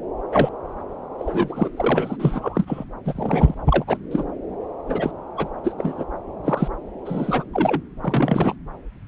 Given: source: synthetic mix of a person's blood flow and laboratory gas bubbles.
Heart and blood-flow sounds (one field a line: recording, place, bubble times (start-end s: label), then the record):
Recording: Doppler ultrasound of blood flow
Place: subclavian vein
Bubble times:
0.31-0.49 s: bubbles
1.19-1.70 s: bubbles
1.76-2.17 s: bubbles
2.19-2.85 s: bubbles
3.04-3.55 s: bubbles
3.66-3.85 s: bubbles
3.87-3.98 s: bubbles
4.11-4.24 s: bubbles
4.88-5.12 s: bubbles
5.37-5.48 s: bubbles
5.63-5.74 s: bubbles
5.78-6.04 s: bubbles
6.44-6.68 s: bubbles
7.05-7.44 s: bubbles
7.53-7.81 s: bubbles
8.03-8.55 s: bubbles
From the record:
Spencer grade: 3 (all of the cardiac periods contain showers or single bubble signals, but not dominating or overriding the cardiac motion signals)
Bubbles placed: anywhere in the cardiac cycle